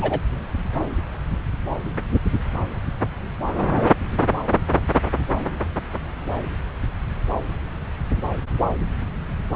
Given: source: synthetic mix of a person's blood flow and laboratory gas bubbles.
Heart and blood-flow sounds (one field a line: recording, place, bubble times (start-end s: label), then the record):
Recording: Doppler ultrasound of blood flow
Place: subclavian vein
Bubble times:
0.00-0.20 s: bubbles
From the record:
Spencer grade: 1 (occasional bubble signal discernible with the cardiac motion signal, with majority of cardiac periods free of bubbles)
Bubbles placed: anywhere in the cardiac cycle